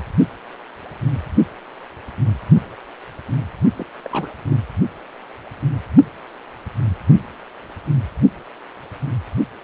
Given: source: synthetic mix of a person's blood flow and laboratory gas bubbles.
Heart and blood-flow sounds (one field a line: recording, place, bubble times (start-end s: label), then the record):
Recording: Doppler ultrasound of blood flow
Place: precordium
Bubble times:
3.77-3.86 s: bubbles
4.04-4.33 s: bubbles
4.50-4.56 s: bubbles
From the record:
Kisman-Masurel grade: 211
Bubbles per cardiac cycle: several, 3 to 8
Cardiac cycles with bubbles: 1 to 10%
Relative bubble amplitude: barely perceptible (0.100 to 0.250)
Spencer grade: 1 (occasional bubble signal discernible with the cardiac motion signal, with majority of cardiac periods free of bubbles)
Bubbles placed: only in the low amplitude regions of the cardiac cycle